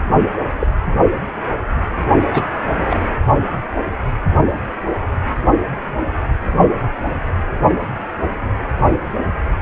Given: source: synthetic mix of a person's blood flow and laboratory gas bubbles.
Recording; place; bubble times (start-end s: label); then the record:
Doppler ultrasound of blood flow; precordium
0.59-0.67 s: bubbles
2.33-2.43 s: bubbles
2.90-2.98 s: bubbles
From the record:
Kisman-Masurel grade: 123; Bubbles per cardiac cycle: 1 to 2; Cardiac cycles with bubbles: 10 to 50%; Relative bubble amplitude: loud (0.450 to 0.775); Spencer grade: 2 (many but less than half of the cardiac periods contain bubble signals, singularly or in groups); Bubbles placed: only in the low amplitude regions of the cardiac cycle